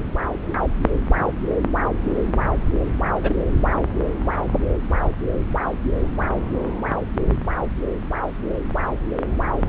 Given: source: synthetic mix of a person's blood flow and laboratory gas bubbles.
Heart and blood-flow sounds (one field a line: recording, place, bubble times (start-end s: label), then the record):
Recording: Doppler ultrasound of blood flow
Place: subclavian vein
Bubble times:
3.21-3.35 s: bubbles
From the record:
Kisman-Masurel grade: 112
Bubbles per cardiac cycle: 1 to 2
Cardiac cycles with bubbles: 1 to 10%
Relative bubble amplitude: moderate (0.250 to 0.450)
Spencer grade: 1 (occasional bubble signal discernible with the cardiac motion signal, with majority of cardiac periods free of bubbles)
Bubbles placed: anywhere in the cardiac cycle